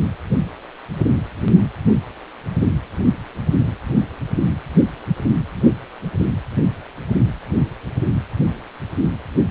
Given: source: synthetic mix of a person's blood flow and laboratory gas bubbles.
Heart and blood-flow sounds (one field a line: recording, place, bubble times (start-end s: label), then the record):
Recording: Doppler ultrasound of blood flow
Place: precordium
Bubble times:
no bubbles
From the record:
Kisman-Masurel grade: 000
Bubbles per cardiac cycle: 0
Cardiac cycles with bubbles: 0%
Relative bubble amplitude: no bubbles discernible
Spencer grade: 0 (complete lack of bubble signals)